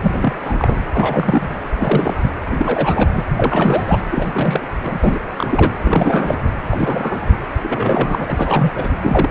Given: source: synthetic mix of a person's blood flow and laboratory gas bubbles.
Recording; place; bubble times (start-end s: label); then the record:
Doppler ultrasound of blood flow; precordium
0.02-0.33 s: bubbles
0.42-0.76 s: bubbles
0.94-1.49 s: bubbles
1.78-2.14 s: bubbles
2.21-2.31 s: bubbles
2.46-3.09 s: bubbles
3.16-3.22 s: bubbles
3.36-4.01 s: bubbles
4.12-4.61 s: bubbles
4.83-4.99 s: bubbles
5.04-5.20 s: bubbles
5.37-5.75 s: bubbles
5.83-6.40 s: bubbles
6.71-7.28 s: bubbles
7.63-8.71 s: bubbles
8.76-8.90 s: bubbles
9.02-9.31 s: bubbles
From the record:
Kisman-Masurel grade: 342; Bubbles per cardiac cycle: rolling drumbeat, 9 or more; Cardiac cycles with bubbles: 100%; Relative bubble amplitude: moderate (0.250 to 0.450); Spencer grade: 3 (all of the cardiac periods contain showers or single bubble signals, but not dominating or overriding the cardiac motion signals); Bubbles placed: anywhere in the cardiac cycle